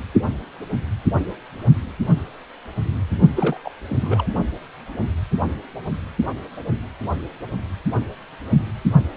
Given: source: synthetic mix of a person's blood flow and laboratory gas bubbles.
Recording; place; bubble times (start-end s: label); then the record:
Doppler ultrasound of blood flow; precordium
3.35-3.57 s: bubbles
3.63-3.71 s: bubbles
3.88-4.28 s: bubbles
From the record:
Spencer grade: 1 (occasional bubble signal discernible with the cardiac motion signal, with majority of cardiac periods free of bubbles); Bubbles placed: only in the low amplitude regions of the cardiac cycle